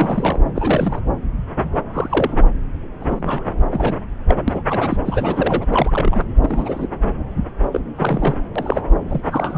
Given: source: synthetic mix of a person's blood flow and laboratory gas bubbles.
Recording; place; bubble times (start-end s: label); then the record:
Doppler ultrasound of blood flow; subclavian vein
0.00-0.40 s: bubbles
0.55-1.02 s: bubbles
1.94-2.37 s: bubbles
3.00-3.44 s: bubbles
3.71-3.94 s: bubbles
4.27-4.43 s: bubbles
4.47-4.62 s: bubbles
4.69-4.97 s: bubbles
5.04-5.66 s: bubbles
5.70-6.27 s: bubbles
6.42-6.88 s: bubbles
7.72-7.80 s: bubbles
7.96-8.38 s: bubbles
8.55-8.81 s: bubbles
9.08-9.21 s: bubbles
9.30-9.58 s: bubbles
From the record:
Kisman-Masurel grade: 232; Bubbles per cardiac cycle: several, 3 to 8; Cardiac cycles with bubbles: 50 to 99%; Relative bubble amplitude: moderate (0.250 to 0.450); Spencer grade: 3 (all of the cardiac periods contain showers or single bubble signals, but not dominating or overriding the cardiac motion signals); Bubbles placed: anywhere in the cardiac cycle